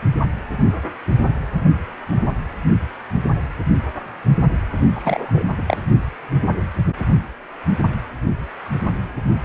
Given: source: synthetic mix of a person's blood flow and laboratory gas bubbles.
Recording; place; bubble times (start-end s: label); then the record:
Doppler ultrasound of blood flow; precordium
4.95-5.44 s: bubbles
5.58-5.62 s: bubbles
5.67-5.77 s: bubbles
From the record:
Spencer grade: 1 (occasional bubble signal discernible with the cardiac motion signal, with majority of cardiac periods free of bubbles); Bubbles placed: only in the low amplitude regions of the cardiac cycle